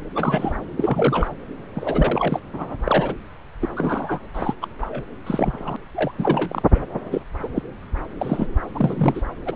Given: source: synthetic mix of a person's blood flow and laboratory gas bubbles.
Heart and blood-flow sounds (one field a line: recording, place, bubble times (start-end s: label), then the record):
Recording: Doppler ultrasound of blood flow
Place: subclavian vein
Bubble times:
0.15-0.52 s: bubbles
0.77-1.28 s: bubbles
1.73-2.40 s: bubbles
2.53-2.76 s: bubbles
2.84-3.14 s: bubbles
3.60-4.19 s: bubbles
4.34-4.54 s: bubbles
4.61-4.66 s: bubbles
4.81-5.02 s: bubbles
5.26-5.76 s: bubbles
5.94-6.12 s: bubbles
6.18-6.62 s: bubbles
6.74-6.79 s: bubbles
7.10-7.21 s: bubbles
7.42-7.48 s: bubbles
7.54-7.62 s: bubbles
8.19-8.48 s: bubbles
8.75-9.21 s: bubbles
9.46-9.55 s: bubbles
From the record:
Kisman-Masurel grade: 242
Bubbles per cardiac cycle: several, 3 to 8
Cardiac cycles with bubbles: 100%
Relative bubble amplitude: moderate (0.250 to 0.450)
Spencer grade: 3 (all of the cardiac periods contain showers or single bubble signals, but not dominating or overriding the cardiac motion signals)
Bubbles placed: anywhere in the cardiac cycle